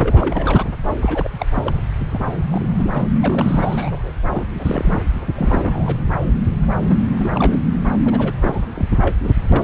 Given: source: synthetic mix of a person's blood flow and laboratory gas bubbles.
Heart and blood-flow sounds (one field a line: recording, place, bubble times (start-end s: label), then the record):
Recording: Doppler ultrasound of blood flow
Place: subclavian vein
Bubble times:
0.00-0.64 s: bubbles
1.01-1.29 s: bubbles
1.39-1.88 s: bubbles
2.10-2.45 s: bubbles
2.50-2.72 s: bubbles
2.78-2.91 s: bubbles
2.93-3.05 s: bubbles
3.23-4.11 s: bubbles
4.30-4.46 s: bubbles
4.54-5.03 s: bubbles
5.35-5.97 s: bubbles
6.26-6.39 s: bubbles
6.81-7.01 s: bubbles
7.10-7.61 s: bubbles
8.05-8.32 s: bubbles
8.41-8.67 s: bubbles
8.76-8.86 s: bubbles
9.01-9.16 s: bubbles
9.23-9.31 s: bubbles
9.52-9.64 s: bubbles
From the record:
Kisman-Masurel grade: 342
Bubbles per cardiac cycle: rolling drumbeat, 9 or more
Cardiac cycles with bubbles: 100%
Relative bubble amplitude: moderate (0.250 to 0.450)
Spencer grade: 3 (all of the cardiac periods contain showers or single bubble signals, but not dominating or overriding the cardiac motion signals)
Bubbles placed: anywhere in the cardiac cycle